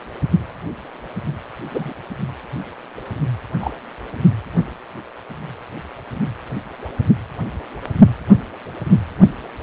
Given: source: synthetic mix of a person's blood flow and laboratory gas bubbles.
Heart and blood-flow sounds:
Doppler ultrasound of blood flow; precordium
1.70-1.93 s: bubbles
3.60-3.76 s: bubbles
From the record:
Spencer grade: 2 (many but less than half of the cardiac periods contain bubble signals, singularly or in groups); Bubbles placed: only in the low amplitude regions of the cardiac cycle

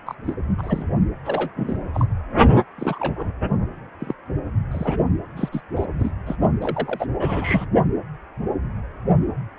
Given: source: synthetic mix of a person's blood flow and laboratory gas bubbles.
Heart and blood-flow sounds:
Doppler ultrasound of blood flow; precordium
0.06-0.15 s: bubbles
0.25-0.34 s: bubbles
0.58-0.86 s: bubbles
1.25-1.50 s: bubbles
1.56-1.81 s: bubbles
1.94-2.08 s: bubbles
2.78-3.32 s: bubbles
4.00-4.14 s: bubbles
4.71-4.98 s: bubbles
5.36-5.49 s: bubbles
5.51-5.60 s: bubbles
5.76-5.86 s: bubbles
5.92-6.12 s: bubbles
6.26-6.35 s: bubbles
6.60-7.06 s: bubbles
7.19-7.66 s: bubbles
From the record:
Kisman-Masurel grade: 232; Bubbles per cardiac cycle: several, 3 to 8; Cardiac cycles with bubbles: 50 to 99%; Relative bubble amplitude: moderate (0.250 to 0.450); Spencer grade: 3 (all of the cardiac periods contain showers or single bubble signals, but not dominating or overriding the cardiac motion signals); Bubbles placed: only in the low amplitude regions of the cardiac cycle

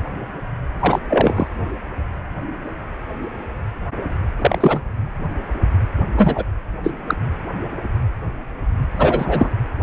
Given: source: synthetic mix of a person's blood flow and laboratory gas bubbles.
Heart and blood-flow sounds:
Doppler ultrasound of blood flow; precordium
0.79-0.99 s: bubbles
1.10-1.48 s: bubbles
4.38-4.81 s: bubbles
6.16-6.44 s: bubbles
6.83-6.92 s: bubbles
7.07-7.14 s: bubbles
8.96-9.51 s: bubbles
From the record:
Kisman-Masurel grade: 233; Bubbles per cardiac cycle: several, 3 to 8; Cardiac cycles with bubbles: 50 to 99%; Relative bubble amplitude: loud (0.450 to 0.775); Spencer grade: 3 (all of the cardiac periods contain showers or single bubble signals, but not dominating or overriding the cardiac motion signals); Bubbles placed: anywhere in the cardiac cycle

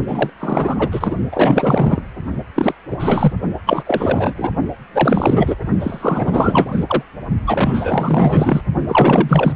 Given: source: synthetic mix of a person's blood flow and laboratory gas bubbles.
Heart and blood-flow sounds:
Doppler ultrasound of blood flow; precordium
0.08-0.30 s: bubbles
0.40-0.89 s: bubbles
0.91-1.17 s: bubbles
1.32-2.02 s: bubbles
2.55-2.75 s: bubbles
2.91-3.33 s: bubbles
3.66-3.83 s: bubbles
3.86-4.53 s: bubbles
4.94-5.55 s: bubbles
5.79-7.02 s: bubbles
7.46-8.61 s: bubbles
8.88-9.53 s: bubbles
From the record:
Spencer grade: 4 (maximum detectable bubble signal sounding continuously throughout systole and diastole of every cardiac period, and overriding the amplitude of the normal cardiac signals); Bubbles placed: only in the low amplitude regions of the cardiac cycle

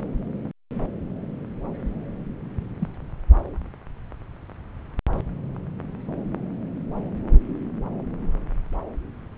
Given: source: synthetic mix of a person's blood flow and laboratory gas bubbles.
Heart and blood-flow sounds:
Doppler ultrasound of blood flow; subclavian vein
2.79-2.88 s: bubbles
From the record:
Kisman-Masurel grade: 111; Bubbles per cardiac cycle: 1 to 2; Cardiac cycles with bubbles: 1 to 10%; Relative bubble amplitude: barely perceptible (0.100 to 0.250); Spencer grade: 1 (occasional bubble signal discernible with the cardiac motion signal, with majority of cardiac periods free of bubbles); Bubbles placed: anywhere in the cardiac cycle

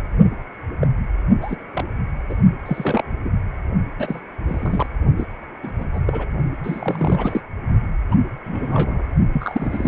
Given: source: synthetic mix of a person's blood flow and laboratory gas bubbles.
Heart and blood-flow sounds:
Doppler ultrasound of blood flow; precordium
0.81-0.88 s: bubbles
1.41-1.56 s: bubbles
1.73-1.84 s: bubbles
2.29-2.35 s: bubbles
2.66-3.02 s: bubbles
3.24-3.31 s: bubbles
3.98-4.20 s: bubbles
4.47-4.87 s: bubbles
5.17-5.26 s: bubbles
5.62-5.71 s: bubbles
5.79-5.84 s: bubbles
5.93-6.00 s: bubbles
6.07-6.27 s: bubbles
6.63-7.41 s: bubbles
8.11-8.14 s: bubbles
8.44-9.05 s: bubbles
9.32-9.88 s: bubbles
From the record:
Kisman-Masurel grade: 242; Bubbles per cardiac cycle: several, 3 to 8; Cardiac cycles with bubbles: 100%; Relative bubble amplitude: moderate (0.250 to 0.450); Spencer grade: 3 (all of the cardiac periods contain showers or single bubble signals, but not dominating or overriding the cardiac motion signals); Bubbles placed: only in the low amplitude regions of the cardiac cycle

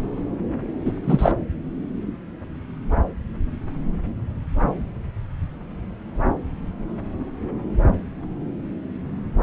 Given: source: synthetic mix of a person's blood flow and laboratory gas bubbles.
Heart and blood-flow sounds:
Doppler ultrasound of blood flow; subclavian vein
0.85-0.91 s: bubbles
1.06-1.32 s: bubbles
From the record:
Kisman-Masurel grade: 223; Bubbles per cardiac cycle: several, 3 to 8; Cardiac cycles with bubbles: 10 to 50%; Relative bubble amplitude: loud (0.450 to 0.775); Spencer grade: 2 (many but less than half of the cardiac periods contain bubble signals, singularly or in groups); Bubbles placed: anywhere in the cardiac cycle

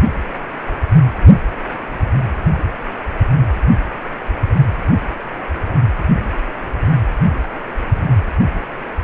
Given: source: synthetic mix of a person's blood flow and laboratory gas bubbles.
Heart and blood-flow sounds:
Doppler ultrasound of blood flow; precordium
no bubbles
From the record:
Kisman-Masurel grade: 000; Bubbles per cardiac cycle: 0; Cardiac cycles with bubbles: 0%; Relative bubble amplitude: no bubbles discernible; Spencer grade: 0 (complete lack of bubble signals)

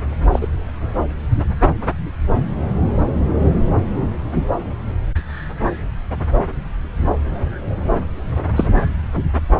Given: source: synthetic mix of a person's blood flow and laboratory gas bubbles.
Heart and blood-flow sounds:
Doppler ultrasound of blood flow; subclavian vein
0.32-0.48 s: bubbles
8.55-8.67 s: bubbles
From the record:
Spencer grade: 1 (occasional bubble signal discernible with the cardiac motion signal, with majority of cardiac periods free of bubbles); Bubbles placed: anywhere in the cardiac cycle

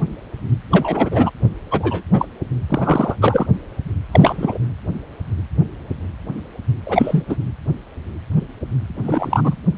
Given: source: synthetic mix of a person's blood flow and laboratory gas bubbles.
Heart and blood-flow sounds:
Doppler ultrasound of blood flow; precordium
0.71-1.30 s: bubbles
1.70-2.02 s: bubbles
2.12-2.26 s: bubbles
2.69-3.16 s: bubbles
3.21-3.47 s: bubbles
4.11-4.57 s: bubbles
6.85-7.23 s: bubbles
7.28-7.36 s: bubbles
9.03-9.57 s: bubbles
From the record:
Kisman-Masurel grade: 233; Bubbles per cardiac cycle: several, 3 to 8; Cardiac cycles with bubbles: 50 to 99%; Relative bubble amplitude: loud (0.450 to 0.775); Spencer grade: 3 (all of the cardiac periods contain showers or single bubble signals, but not dominating or overriding the cardiac motion signals); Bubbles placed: anywhere in the cardiac cycle

